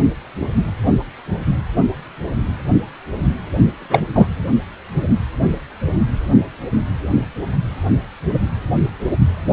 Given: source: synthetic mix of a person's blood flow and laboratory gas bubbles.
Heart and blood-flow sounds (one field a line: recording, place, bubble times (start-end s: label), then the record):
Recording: Doppler ultrasound of blood flow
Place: precordium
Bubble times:
3.79-4.03 s: bubbles
4.14-4.27 s: bubbles
From the record:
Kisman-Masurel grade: 213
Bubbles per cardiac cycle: several, 3 to 8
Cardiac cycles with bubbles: 1 to 10%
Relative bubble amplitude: loud (0.450 to 0.775)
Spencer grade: 1 (occasional bubble signal discernible with the cardiac motion signal, with majority of cardiac periods free of bubbles)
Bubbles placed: anywhere in the cardiac cycle